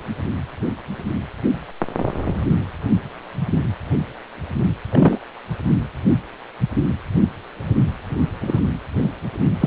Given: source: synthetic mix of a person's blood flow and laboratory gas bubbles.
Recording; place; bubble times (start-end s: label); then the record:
Doppler ultrasound of blood flow; precordium
4.91-5.19 s: bubbles
8.40-8.60 s: bubbles
9.61-9.66 s: bubbles
From the record:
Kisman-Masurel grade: 122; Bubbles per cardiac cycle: 1 to 2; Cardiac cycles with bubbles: 10 to 50%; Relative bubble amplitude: moderate (0.250 to 0.450); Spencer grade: 2 (many but less than half of the cardiac periods contain bubble signals, singularly or in groups); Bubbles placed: anywhere in the cardiac cycle